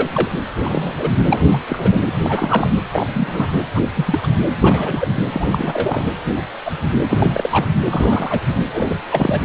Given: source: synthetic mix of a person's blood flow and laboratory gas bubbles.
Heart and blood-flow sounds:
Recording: Doppler ultrasound of blood flow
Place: precordium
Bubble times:
0.00-0.09 s: bubbles
0.14-0.30 s: bubbles
0.64-0.93 s: bubbles
0.99-1.10 s: bubbles
1.24-1.48 s: bubbles
1.53-1.57 s: bubbles
1.68-1.98 s: bubbles
2.06-2.12 s: bubbles
2.24-2.70 s: bubbles
2.92-3.07 s: bubbles
3.12-3.47 s: bubbles
3.75-3.81 s: bubbles
3.94-4.19 s: bubbles
4.23-4.27 s: bubbles
4.61-5.08 s: bubbles
5.32-6.06 s: bubbles
6.26-6.42 s: bubbles
6.64-6.72 s: bubbles
7.10-7.67 s: bubbles
7.84-8.44 s: bubbles
8.48-8.58 s: bubbles
8.73-8.95 s: bubbles
9.12-9.41 s: bubbles
From the record:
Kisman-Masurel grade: 232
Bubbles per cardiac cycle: several, 3 to 8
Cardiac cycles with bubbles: 50 to 99%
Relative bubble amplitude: moderate (0.250 to 0.450)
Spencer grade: 3 (all of the cardiac periods contain showers or single bubble signals, but not dominating or overriding the cardiac motion signals)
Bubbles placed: anywhere in the cardiac cycle

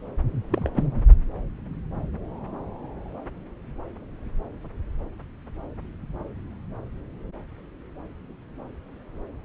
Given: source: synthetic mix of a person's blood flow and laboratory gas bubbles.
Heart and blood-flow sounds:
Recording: Doppler ultrasound of blood flow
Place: subclavian vein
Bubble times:
0.52-0.69 s: bubbles
0.74-0.83 s: bubbles
From the record:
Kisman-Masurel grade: 121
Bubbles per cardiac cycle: 1 to 2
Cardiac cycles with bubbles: 10 to 50%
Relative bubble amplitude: barely perceptible (0.100 to 0.250)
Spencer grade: 2 (many but less than half of the cardiac periods contain bubble signals, singularly or in groups)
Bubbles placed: anywhere in the cardiac cycle

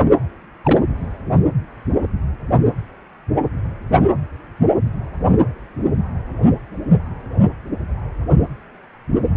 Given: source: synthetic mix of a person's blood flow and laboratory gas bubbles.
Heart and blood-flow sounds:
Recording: Doppler ultrasound of blood flow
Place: precordium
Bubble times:
0.65-0.79 s: bubbles
From the record:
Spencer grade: 1 (occasional bubble signal discernible with the cardiac motion signal, with majority of cardiac periods free of bubbles)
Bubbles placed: anywhere in the cardiac cycle

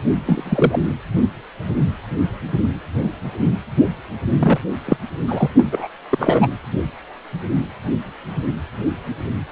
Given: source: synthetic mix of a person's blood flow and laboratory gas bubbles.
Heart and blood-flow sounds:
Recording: Doppler ultrasound of blood flow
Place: precordium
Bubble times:
0.14-0.79 s: bubbles
4.39-4.58 s: bubbles
4.85-4.97 s: bubbles
5.28-5.48 s: bubbles
5.56-5.88 s: bubbles
6.11-6.48 s: bubbles
From the record:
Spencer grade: 2 (many but less than half of the cardiac periods contain bubble signals, singularly or in groups)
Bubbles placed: anywhere in the cardiac cycle

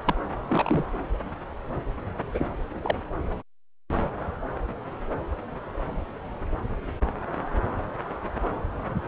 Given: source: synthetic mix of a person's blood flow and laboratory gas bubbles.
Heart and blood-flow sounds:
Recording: Doppler ultrasound of blood flow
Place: subclavian vein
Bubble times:
0.07-0.14 s: bubbles
0.48-0.85 s: bubbles
2.34-2.48 s: bubbles
2.82-2.96 s: bubbles
From the record:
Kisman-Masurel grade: 221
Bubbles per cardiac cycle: several, 3 to 8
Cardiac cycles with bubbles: 10 to 50%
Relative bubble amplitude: barely perceptible (0.100 to 0.250)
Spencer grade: 2 (many but less than half of the cardiac periods contain bubble signals, singularly or in groups)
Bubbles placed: anywhere in the cardiac cycle

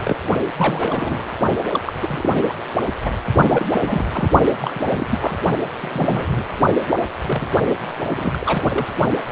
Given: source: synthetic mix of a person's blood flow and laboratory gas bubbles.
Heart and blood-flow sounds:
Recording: Doppler ultrasound of blood flow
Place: precordium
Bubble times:
0.03-0.16 s: bubbles
0.58-1.30 s: bubbles
1.73-1.81 s: bubbles
1.86-1.93 s: bubbles
2.02-2.33 s: bubbles
2.48-2.54 s: bubbles
3.04-3.11 s: bubbles
3.49-3.66 s: bubbles
3.73-4.31 s: bubbles
4.61-4.83 s: bubbles
4.91-5.06 s: bubbles
5.09-5.36 s: bubbles
5.77-6.42 s: bubbles
6.90-6.97 s: bubbles
7.26-7.48 s: bubbles
8.16-8.86 s: bubbles
9.11-9.17 s: bubbles
9.28-9.32 s: bubbles
From the record:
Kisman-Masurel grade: 242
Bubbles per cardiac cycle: several, 3 to 8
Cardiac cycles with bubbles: 100%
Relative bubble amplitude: moderate (0.250 to 0.450)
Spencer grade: 3 (all of the cardiac periods contain showers or single bubble signals, but not dominating or overriding the cardiac motion signals)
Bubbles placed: only in the low amplitude regions of the cardiac cycle

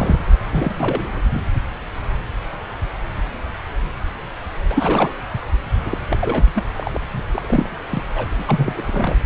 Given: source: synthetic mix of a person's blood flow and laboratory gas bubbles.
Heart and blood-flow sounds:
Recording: Doppler ultrasound of blood flow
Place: subclavian vein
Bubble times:
0.00-0.19 s: bubbles
0.51-1.21 s: bubbles
1.33-1.40 s: bubbles
4.69-5.12 s: bubbles
5.85-5.98 s: bubbles
6.09-6.18 s: bubbles
6.21-6.50 s: bubbles
6.55-6.63 s: bubbles
6.76-7.20 s: bubbles
7.32-7.78 s: bubbles
7.91-8.03 s: bubbles
8.15-8.27 s: bubbles
8.38-8.44 s: bubbles
8.48-8.83 s: bubbles
8.87-9.17 s: bubbles
From the record:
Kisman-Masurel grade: 332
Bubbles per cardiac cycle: rolling drumbeat, 9 or more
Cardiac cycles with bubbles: 50 to 99%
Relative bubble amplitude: moderate (0.250 to 0.450)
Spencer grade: 3 (all of the cardiac periods contain showers or single bubble signals, but not dominating or overriding the cardiac motion signals)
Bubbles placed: anywhere in the cardiac cycle

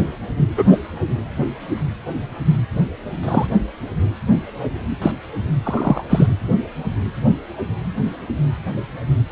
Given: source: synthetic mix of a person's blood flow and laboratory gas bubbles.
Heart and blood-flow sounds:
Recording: Doppler ultrasound of blood flow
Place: precordium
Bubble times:
0.57-0.64 s: bubbles
0.72-0.77 s: bubbles
3.23-3.46 s: bubbles
5.02-5.12 s: bubbles
5.63-6.04 s: bubbles
6.09-6.26 s: bubbles
From the record:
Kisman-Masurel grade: 123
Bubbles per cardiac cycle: 1 to 2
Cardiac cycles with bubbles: 10 to 50%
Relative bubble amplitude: loud (0.450 to 0.775)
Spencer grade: 2 (many but less than half of the cardiac periods contain bubble signals, singularly or in groups)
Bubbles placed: anywhere in the cardiac cycle

